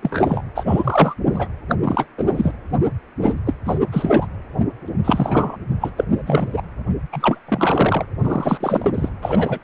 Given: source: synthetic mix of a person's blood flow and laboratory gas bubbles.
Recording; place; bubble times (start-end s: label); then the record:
Doppler ultrasound of blood flow; precordium
0.00-0.42 s: bubbles
0.55-0.64 s: bubbles
0.67-1.15 s: bubbles
1.25-1.49 s: bubbles
1.69-1.75 s: bubbles
1.79-2.06 s: bubbles
2.17-2.52 s: bubbles
3.19-3.38 s: bubbles
3.46-3.54 s: bubbles
3.65-3.79 s: bubbles
3.92-4.26 s: bubbles
4.88-4.91 s: bubbles
5.04-5.57 s: bubbles
5.80-5.91 s: bubbles
5.97-6.04 s: bubbles
6.10-6.62 s: bubbles
7.12-7.40 s: bubbles
7.45-8.06 s: bubbles
8.24-8.92 s: bubbles
8.95-9.09 s: bubbles
9.22-9.59 s: bubbles
From the record:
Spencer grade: 3 (all of the cardiac periods contain showers or single bubble signals, but not dominating or overriding the cardiac motion signals); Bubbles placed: anywhere in the cardiac cycle